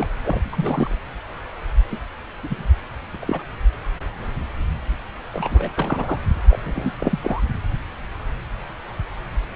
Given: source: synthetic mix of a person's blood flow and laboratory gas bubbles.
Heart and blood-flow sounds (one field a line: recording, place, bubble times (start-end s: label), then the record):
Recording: Doppler ultrasound of blood flow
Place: subclavian vein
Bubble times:
0.00-0.07 s: bubbles
0.24-0.42 s: bubbles
0.45-0.49 s: bubbles
0.52-0.97 s: bubbles
1.91-1.98 s: bubbles
2.43-2.67 s: bubbles
3.14-3.17 s: bubbles
3.21-3.45 s: bubbles
5.33-6.20 s: bubbles
6.50-6.59 s: bubbles
6.64-7.18 s: bubbles
7.22-7.41 s: bubbles
From the record:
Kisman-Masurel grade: 222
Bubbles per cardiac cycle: several, 3 to 8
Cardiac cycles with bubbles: 10 to 50%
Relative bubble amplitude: moderate (0.250 to 0.450)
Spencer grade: 2 (many but less than half of the cardiac periods contain bubble signals, singularly or in groups)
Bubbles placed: anywhere in the cardiac cycle